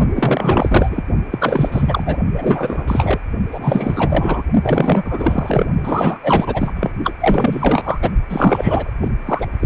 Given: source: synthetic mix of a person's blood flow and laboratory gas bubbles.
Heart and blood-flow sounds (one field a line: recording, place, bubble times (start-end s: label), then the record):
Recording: Doppler ultrasound of blood flow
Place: precordium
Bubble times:
0.14-1.04 s: bubbles
1.30-2.18 s: bubbles
2.33-2.85 s: bubbles
2.88-3.20 s: bubbles
3.51-4.43 s: bubbles
4.62-5.65 s: bubbles
5.84-6.17 s: bubbles
6.23-6.73 s: bubbles
6.75-6.91 s: bubbles
7.04-7.15 s: bubbles
7.20-7.98 s: bubbles
8.02-8.12 s: bubbles
8.29-8.91 s: bubbles
9.01-9.08 s: bubbles
9.25-9.46 s: bubbles
9.61-9.66 s: bubbles
From the record:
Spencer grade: 4 (maximum detectable bubble signal sounding continuously throughout systole and diastole of every cardiac period, and overriding the amplitude of the normal cardiac signals)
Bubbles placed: only in the low amplitude regions of the cardiac cycle